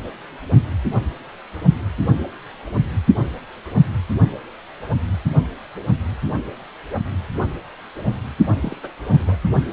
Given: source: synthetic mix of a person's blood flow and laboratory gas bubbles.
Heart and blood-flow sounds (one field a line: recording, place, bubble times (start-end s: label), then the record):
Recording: Doppler ultrasound of blood flow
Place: precordium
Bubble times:
8.62-8.76 s: bubbles
8.83-8.89 s: bubbles
9.08-9.36 s: bubbles
From the record:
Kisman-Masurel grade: 212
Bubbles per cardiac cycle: several, 3 to 8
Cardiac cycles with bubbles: 1 to 10%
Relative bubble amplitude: moderate (0.250 to 0.450)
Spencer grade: 1 (occasional bubble signal discernible with the cardiac motion signal, with majority of cardiac periods free of bubbles)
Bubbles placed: only in the low amplitude regions of the cardiac cycle